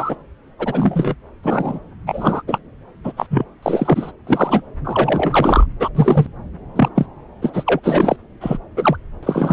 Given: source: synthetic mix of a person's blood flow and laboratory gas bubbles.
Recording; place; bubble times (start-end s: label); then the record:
Doppler ultrasound of blood flow; subclavian vein
0.00-0.16 s: bubbles
0.58-1.15 s: bubbles
1.42-1.79 s: bubbles
2.06-2.42 s: bubbles
2.47-2.58 s: bubbles
3.04-3.12 s: bubbles
3.17-3.26 s: bubbles
3.30-3.45 s: bubbles
3.62-4.12 s: bubbles
4.26-4.62 s: bubbles
4.84-5.66 s: bubbles
5.79-5.90 s: bubbles
5.95-6.26 s: bubbles
6.75-6.88 s: bubbles
6.96-7.06 s: bubbles
7.42-7.50 s: bubbles
7.53-7.80 s: bubbles
7.83-8.17 s: bubbles
8.41-8.58 s: bubbles
8.77-8.97 s: bubbles
9.23-9.52 s: bubbles
From the record:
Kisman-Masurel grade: 243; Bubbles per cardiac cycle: several, 3 to 8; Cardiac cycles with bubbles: 100%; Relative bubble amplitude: loud (0.450 to 0.775); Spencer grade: 3 (all of the cardiac periods contain showers or single bubble signals, but not dominating or overriding the cardiac motion signals); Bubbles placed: anywhere in the cardiac cycle